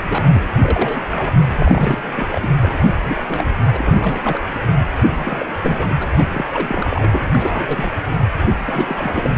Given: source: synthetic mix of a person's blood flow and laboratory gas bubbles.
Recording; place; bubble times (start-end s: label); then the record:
Doppler ultrasound of blood flow; precordium
0.03-0.24 s: bubbles
0.33-0.51 s: bubbles
0.61-1.38 s: bubbles
1.50-2.49 s: bubbles
2.57-2.97 s: bubbles
3.02-3.23 s: bubbles
3.28-3.46 s: bubbles
3.72-4.46 s: bubbles
5.00-5.54 s: bubbles
5.58-5.95 s: bubbles
6.00-6.07 s: bubbles
6.17-6.25 s: bubbles
6.34-6.46 s: bubbles
6.54-7.25 s: bubbles
7.33-7.91 s: bubbles
8.57-9.30 s: bubbles
From the record:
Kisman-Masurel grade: 342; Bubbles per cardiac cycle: rolling drumbeat, 9 or more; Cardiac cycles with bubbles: 100%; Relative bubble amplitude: moderate (0.250 to 0.450); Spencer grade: 3 (all of the cardiac periods contain showers or single bubble signals, but not dominating or overriding the cardiac motion signals); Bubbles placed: anywhere in the cardiac cycle